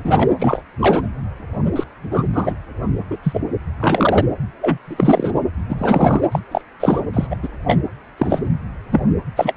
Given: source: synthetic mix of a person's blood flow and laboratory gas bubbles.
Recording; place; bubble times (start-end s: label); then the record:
Doppler ultrasound of blood flow; precordium
0.04-0.33 s: bubbles
0.39-0.61 s: bubbles
0.79-1.06 s: bubbles
1.75-1.83 s: bubbles
2.11-2.26 s: bubbles
2.33-2.55 s: bubbles
3.10-3.18 s: bubbles
3.23-3.40 s: bubbles
3.80-4.25 s: bubbles
4.61-4.78 s: bubbles
4.86-5.32 s: bubbles
5.69-6.21 s: bubbles
6.32-6.39 s: bubbles
6.51-6.61 s: bubbles
6.79-7.02 s: bubbles
7.13-7.27 s: bubbles
7.31-7.36 s: bubbles
7.42-7.48 s: bubbles
7.67-7.79 s: bubbles
8.18-8.49 s: bubbles
8.91-9.01 s: bubbles
9.36-9.54 s: bubbles
From the record:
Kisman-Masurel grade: 233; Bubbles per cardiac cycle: several, 3 to 8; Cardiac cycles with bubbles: 50 to 99%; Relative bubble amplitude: loud (0.450 to 0.775); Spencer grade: 3 (all of the cardiac periods contain showers or single bubble signals, but not dominating or overriding the cardiac motion signals); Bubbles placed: anywhere in the cardiac cycle